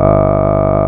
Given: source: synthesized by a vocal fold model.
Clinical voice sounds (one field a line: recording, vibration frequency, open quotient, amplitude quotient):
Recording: sustained vowel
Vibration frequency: 50 Hz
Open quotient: 0.3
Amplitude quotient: 1.2